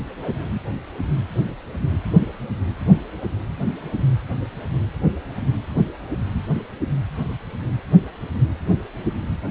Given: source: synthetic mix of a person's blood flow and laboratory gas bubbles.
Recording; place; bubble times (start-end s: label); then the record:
Doppler ultrasound of blood flow; precordium
no bubbles
From the record:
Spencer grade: 0 (complete lack of bubble signals)